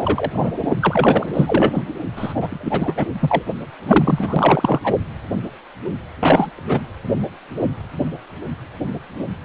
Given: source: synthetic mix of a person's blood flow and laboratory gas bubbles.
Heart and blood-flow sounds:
Doppler ultrasound of blood flow; precordium
0.01-0.51 s: bubbles
0.61-0.76 s: bubbles
0.79-1.27 s: bubbles
1.33-1.82 s: bubbles
2.16-2.47 s: bubbles
2.50-3.05 s: bubbles
3.21-3.42 s: bubbles
3.87-4.81 s: bubbles
4.83-4.95 s: bubbles
6.21-6.51 s: bubbles
6.56-6.82 s: bubbles
From the record:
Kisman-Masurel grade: 233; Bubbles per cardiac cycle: several, 3 to 8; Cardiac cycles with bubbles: 50 to 99%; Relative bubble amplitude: loud (0.450 to 0.775); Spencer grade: 3 (all of the cardiac periods contain showers or single bubble signals, but not dominating or overriding the cardiac motion signals); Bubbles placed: anywhere in the cardiac cycle

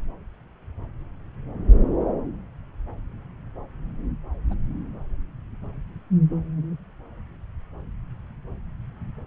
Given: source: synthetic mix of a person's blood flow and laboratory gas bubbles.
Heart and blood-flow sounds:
Doppler ultrasound of blood flow; subclavian vein
4.50-4.54 s: bubbles
From the record:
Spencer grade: 1 (occasional bubble signal discernible with the cardiac motion signal, with majority of cardiac periods free of bubbles); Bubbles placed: anywhere in the cardiac cycle

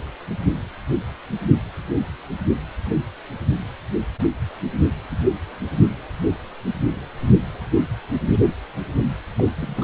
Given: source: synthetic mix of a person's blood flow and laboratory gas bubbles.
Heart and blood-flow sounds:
Doppler ultrasound of blood flow; precordium
9.38-9.42 s: bubbles
9.56-9.83 s: bubbles
From the record:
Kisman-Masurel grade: 211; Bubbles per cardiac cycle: several, 3 to 8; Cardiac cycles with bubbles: 1 to 10%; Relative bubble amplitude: barely perceptible (0.100 to 0.250); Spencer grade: 1 (occasional bubble signal discernible with the cardiac motion signal, with majority of cardiac periods free of bubbles); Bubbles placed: anywhere in the cardiac cycle

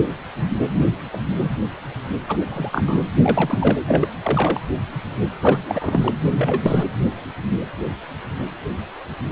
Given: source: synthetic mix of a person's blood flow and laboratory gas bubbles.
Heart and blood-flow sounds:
Doppler ultrasound of blood flow; precordium
1.13-1.18 s: bubbles
1.38-1.49 s: bubbles
2.28-2.38 s: bubbles
2.52-3.06 s: bubbles
3.18-3.77 s: bubbles
3.88-4.09 s: bubbles
4.23-4.60 s: bubbles
5.42-6.12 s: bubbles
6.34-6.84 s: bubbles
From the record:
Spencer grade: 3 (all of the cardiac periods contain showers or single bubble signals, but not dominating or overriding the cardiac motion signals); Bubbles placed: anywhere in the cardiac cycle

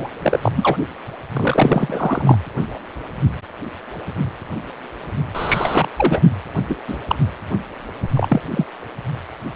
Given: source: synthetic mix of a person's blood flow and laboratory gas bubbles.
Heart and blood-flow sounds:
Doppler ultrasound of blood flow; precordium
0.00-0.07 s: bubbles
0.22-0.52 s: bubbles
0.55-0.77 s: bubbles
1.34-2.36 s: bubbles
5.35-5.88 s: bubbles
5.96-6.21 s: bubbles
6.69-6.76 s: bubbles
6.88-6.98 s: bubbles
7.07-7.15 s: bubbles
8.14-8.42 s: bubbles
8.51-8.66 s: bubbles
From the record:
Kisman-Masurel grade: 233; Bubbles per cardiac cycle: several, 3 to 8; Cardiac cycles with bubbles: 50 to 99%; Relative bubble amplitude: loud (0.450 to 0.775); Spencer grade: 3 (all of the cardiac periods contain showers or single bubble signals, but not dominating or overriding the cardiac motion signals); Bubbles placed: anywhere in the cardiac cycle

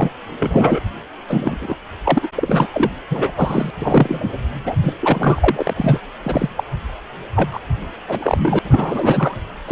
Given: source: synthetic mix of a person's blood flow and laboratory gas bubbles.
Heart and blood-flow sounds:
Doppler ultrasound of blood flow; precordium
0.00-0.10 s: bubbles
0.39-0.80 s: bubbles
1.29-1.76 s: bubbles
2.03-2.28 s: bubbles
2.36-2.67 s: bubbles
2.73-2.91 s: bubbles
3.10-3.31 s: bubbles
3.35-3.70 s: bubbles
3.78-4.30 s: bubbles
4.66-4.75 s: bubbles
4.83-4.93 s: bubbles
5.00-5.73 s: bubbles
5.76-5.99 s: bubbles
6.23-6.50 s: bubbles
6.57-6.64 s: bubbles
7.36-7.60 s: bubbles
8.08-8.59 s: bubbles
8.64-9.41 s: bubbles
9.67-9.71 s: bubbles
From the record:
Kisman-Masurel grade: 343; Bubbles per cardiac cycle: rolling drumbeat, 9 or more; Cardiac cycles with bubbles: 100%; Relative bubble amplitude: loud (0.450 to 0.775); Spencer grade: 3 (all of the cardiac periods contain showers or single bubble signals, but not dominating or overriding the cardiac motion signals); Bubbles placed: anywhere in the cardiac cycle

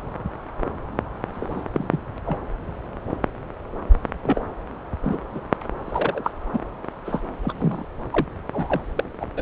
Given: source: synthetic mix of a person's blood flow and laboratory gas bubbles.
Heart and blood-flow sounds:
Doppler ultrasound of blood flow; subclavian vein
1.33-1.67 s: bubbles
1.73-1.88 s: bubbles
1.91-2.00 s: bubbles
2.25-2.38 s: bubbles
4.22-4.42 s: bubbles
5.04-5.19 s: bubbles
5.32-5.40 s: bubbles
5.86-6.31 s: bubbles
6.53-6.59 s: bubbles
7.05-7.21 s: bubbles
7.43-7.53 s: bubbles
7.59-7.86 s: bubbles
8.11-8.25 s: bubbles
8.53-8.81 s: bubbles
8.95-9.04 s: bubbles
9.20-9.27 s: bubbles
9.37-9.42 s: bubbles
From the record:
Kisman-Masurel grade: 232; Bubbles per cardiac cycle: several, 3 to 8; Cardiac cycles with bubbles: 50 to 99%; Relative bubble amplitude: moderate (0.250 to 0.450); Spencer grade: 3 (all of the cardiac periods contain showers or single bubble signals, but not dominating or overriding the cardiac motion signals); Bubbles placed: anywhere in the cardiac cycle

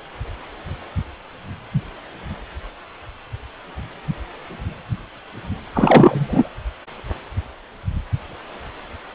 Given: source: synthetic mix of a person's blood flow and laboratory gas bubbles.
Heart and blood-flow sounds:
Doppler ultrasound of blood flow; precordium
5.75-6.49 s: bubbles
From the record:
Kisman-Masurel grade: 213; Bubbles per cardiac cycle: several, 3 to 8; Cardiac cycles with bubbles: 1 to 10%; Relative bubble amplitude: loud (0.450 to 0.775); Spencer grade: 1 (occasional bubble signal discernible with the cardiac motion signal, with majority of cardiac periods free of bubbles); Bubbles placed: anywhere in the cardiac cycle

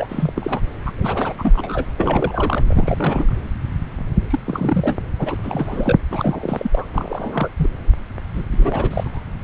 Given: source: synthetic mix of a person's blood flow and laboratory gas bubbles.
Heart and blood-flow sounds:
Doppler ultrasound of blood flow; subclavian vein
0.00-0.33 s: bubbles
0.35-0.61 s: bubbles
0.86-0.92 s: bubbles
0.98-1.34 s: bubbles
1.39-1.85 s: bubbles
1.98-2.62 s: bubbles
2.67-3.32 s: bubbles
4.30-4.40 s: bubbles
4.45-5.04 s: bubbles
5.19-5.38 s: bubbles
5.44-5.99 s: bubbles
6.11-6.86 s: bubbles
6.93-7.52 s: bubbles
7.58-7.69 s: bubbles
8.35-8.44 s: bubbles
8.52-9.21 s: bubbles
From the record:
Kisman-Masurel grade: 342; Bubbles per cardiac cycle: rolling drumbeat, 9 or more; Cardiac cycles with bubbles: 100%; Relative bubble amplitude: moderate (0.250 to 0.450); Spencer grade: 3 (all of the cardiac periods contain showers or single bubble signals, but not dominating or overriding the cardiac motion signals); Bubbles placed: anywhere in the cardiac cycle

